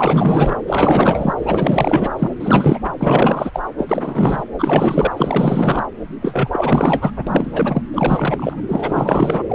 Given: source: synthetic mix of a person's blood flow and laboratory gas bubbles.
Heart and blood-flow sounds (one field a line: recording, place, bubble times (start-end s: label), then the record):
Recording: Doppler ultrasound of blood flow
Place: subclavian vein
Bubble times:
0.00-0.55 s: bubbles
0.67-1.33 s: bubbles
1.37-2.10 s: bubbles
2.19-2.31 s: bubbles
2.40-2.80 s: bubbles
2.85-2.90 s: bubbles
2.99-3.60 s: bubbles
3.78-4.44 s: bubbles
4.58-5.13 s: bubbles
5.17-5.84 s: bubbles
6.22-6.48 s: bubbles
6.52-7.12 s: bubbles
7.17-7.24 s: bubbles
7.27-7.83 s: bubbles
7.93-8.62 s: bubbles
8.68-9.42 s: bubbles
9.48-9.55 s: bubbles
From the record:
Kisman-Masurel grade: 444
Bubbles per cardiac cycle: continuous sound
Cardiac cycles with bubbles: 100%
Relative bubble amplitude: maximal (0.775 to 0.999)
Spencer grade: 4 (maximum detectable bubble signal sounding continuously throughout systole and diastole of every cardiac period, and overriding the amplitude of the normal cardiac signals)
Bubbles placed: anywhere in the cardiac cycle